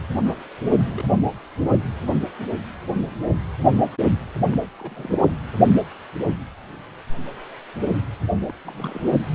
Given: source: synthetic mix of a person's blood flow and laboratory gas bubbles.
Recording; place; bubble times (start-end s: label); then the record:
Doppler ultrasound of blood flow; precordium
0.25-0.35 s: bubbles
0.67-0.85 s: bubbles
0.93-1.05 s: bubbles
4.53-4.57 s: bubbles
4.79-5.28 s: bubbles
8.47-8.53 s: bubbles
8.64-9.12 s: bubbles
From the record:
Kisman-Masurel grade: 221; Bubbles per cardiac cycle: several, 3 to 8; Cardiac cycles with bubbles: 10 to 50%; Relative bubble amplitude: barely perceptible (0.100 to 0.250); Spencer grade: 2 (many but less than half of the cardiac periods contain bubble signals, singularly or in groups); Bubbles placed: anywhere in the cardiac cycle